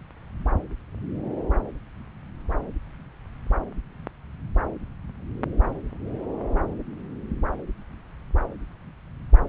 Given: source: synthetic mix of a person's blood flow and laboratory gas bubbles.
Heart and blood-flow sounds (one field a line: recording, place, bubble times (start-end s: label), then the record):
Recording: Doppler ultrasound of blood flow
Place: subclavian vein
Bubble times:
no bubbles
From the record:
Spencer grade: 0 (complete lack of bubble signals)